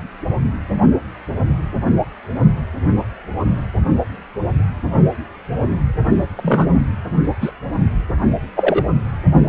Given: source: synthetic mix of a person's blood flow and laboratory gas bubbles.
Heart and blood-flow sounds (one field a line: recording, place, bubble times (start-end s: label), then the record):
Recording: Doppler ultrasound of blood flow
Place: precordium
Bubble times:
6.36-6.70 s: bubbles
7.40-7.51 s: bubbles
8.55-8.83 s: bubbles
From the record:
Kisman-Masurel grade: 123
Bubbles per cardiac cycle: 1 to 2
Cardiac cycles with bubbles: 10 to 50%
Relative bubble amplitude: loud (0.450 to 0.775)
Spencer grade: 2 (many but less than half of the cardiac periods contain bubble signals, singularly or in groups)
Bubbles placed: only in the low amplitude regions of the cardiac cycle